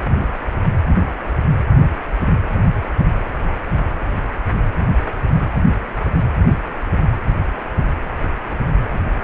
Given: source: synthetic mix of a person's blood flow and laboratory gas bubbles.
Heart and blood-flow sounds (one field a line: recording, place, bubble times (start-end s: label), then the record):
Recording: Doppler ultrasound of blood flow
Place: precordium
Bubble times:
0.53-0.80 s: bubbles
From the record:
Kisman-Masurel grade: 111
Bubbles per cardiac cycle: 1 to 2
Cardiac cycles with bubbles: 1 to 10%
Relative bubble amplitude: barely perceptible (0.100 to 0.250)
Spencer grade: 1 (occasional bubble signal discernible with the cardiac motion signal, with majority of cardiac periods free of bubbles)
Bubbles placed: anywhere in the cardiac cycle